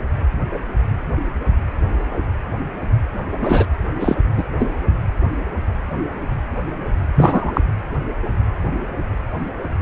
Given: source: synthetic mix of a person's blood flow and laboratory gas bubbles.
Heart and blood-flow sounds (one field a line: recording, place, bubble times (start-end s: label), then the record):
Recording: Doppler ultrasound of blood flow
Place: precordium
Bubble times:
3.40-3.65 s: bubbles
4.00-4.15 s: bubbles
4.37-4.44 s: bubbles
4.58-4.73 s: bubbles
7.15-7.61 s: bubbles
From the record:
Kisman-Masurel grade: 223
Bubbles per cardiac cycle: several, 3 to 8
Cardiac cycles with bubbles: 10 to 50%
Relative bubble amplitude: loud (0.450 to 0.775)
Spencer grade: 2 (many but less than half of the cardiac periods contain bubble signals, singularly or in groups)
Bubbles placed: anywhere in the cardiac cycle